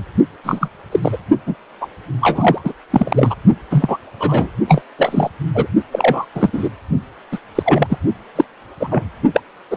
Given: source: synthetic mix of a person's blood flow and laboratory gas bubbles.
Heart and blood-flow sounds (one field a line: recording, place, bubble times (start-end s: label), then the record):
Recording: Doppler ultrasound of blood flow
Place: precordium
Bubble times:
0.43-0.68 s: bubbles
0.91-0.99 s: bubbles
1.02-1.18 s: bubbles
1.46-1.56 s: bubbles
1.80-1.87 s: bubbles
2.21-2.73 s: bubbles
2.90-3.35 s: bubbles
3.71-3.97 s: bubbles
4.20-4.49 s: bubbles
4.67-4.82 s: bubbles
4.97-5.29 s: bubbles
5.54-5.67 s: bubbles
5.92-6.25 s: bubbles
6.34-6.50 s: bubbles
6.53-6.68 s: bubbles
7.32-7.38 s: bubbles
7.55-7.98 s: bubbles
8.35-8.45 s: bubbles
8.80-9.04 s: bubbles
9.34-9.41 s: bubbles
9.70-9.77 s: bubbles
From the record:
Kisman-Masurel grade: 243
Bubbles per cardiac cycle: several, 3 to 8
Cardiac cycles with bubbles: 100%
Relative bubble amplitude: loud (0.450 to 0.775)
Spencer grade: 3 (all of the cardiac periods contain showers or single bubble signals, but not dominating or overriding the cardiac motion signals)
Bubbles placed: only in the low amplitude regions of the cardiac cycle